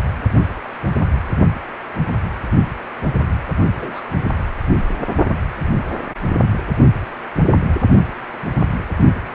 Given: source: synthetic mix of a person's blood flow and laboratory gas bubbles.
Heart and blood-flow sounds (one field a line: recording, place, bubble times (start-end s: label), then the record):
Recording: Doppler ultrasound of blood flow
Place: precordium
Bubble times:
3.75-4.00 s: bubbles
From the record:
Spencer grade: 1 (occasional bubble signal discernible with the cardiac motion signal, with majority of cardiac periods free of bubbles)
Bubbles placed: only in the low amplitude regions of the cardiac cycle